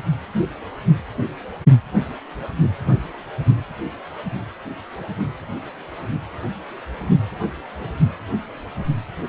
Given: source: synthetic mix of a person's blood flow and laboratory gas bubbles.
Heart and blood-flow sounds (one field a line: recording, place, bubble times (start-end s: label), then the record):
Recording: Doppler ultrasound of blood flow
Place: precordium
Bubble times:
7.43-7.49 s: bubbles
7.79-7.92 s: bubbles
From the record:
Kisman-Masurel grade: 111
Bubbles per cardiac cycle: 1 to 2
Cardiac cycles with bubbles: 1 to 10%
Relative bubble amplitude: barely perceptible (0.100 to 0.250)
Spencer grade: 1 (occasional bubble signal discernible with the cardiac motion signal, with majority of cardiac periods free of bubbles)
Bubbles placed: only in the low amplitude regions of the cardiac cycle